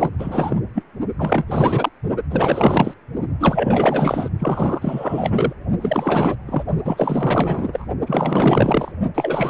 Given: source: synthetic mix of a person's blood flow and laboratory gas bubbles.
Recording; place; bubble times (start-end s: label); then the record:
Doppler ultrasound of blood flow; precordium
0.00-0.10 s: bubbles
0.18-0.60 s: bubbles
0.74-0.83 s: bubbles
1.18-1.45 s: bubbles
1.47-1.90 s: bubbles
2.30-2.94 s: bubbles
3.40-4.29 s: bubbles
4.39-5.53 s: bubbles
5.81-6.35 s: bubbles
6.46-6.63 s: bubbles
6.84-7.86 s: bubbles
8.06-8.91 s: bubbles
9.14-9.50 s: bubbles
From the record:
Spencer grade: 4 (maximum detectable bubble signal sounding continuously throughout systole and diastole of every cardiac period, and overriding the amplitude of the normal cardiac signals); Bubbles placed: only in the low amplitude regions of the cardiac cycle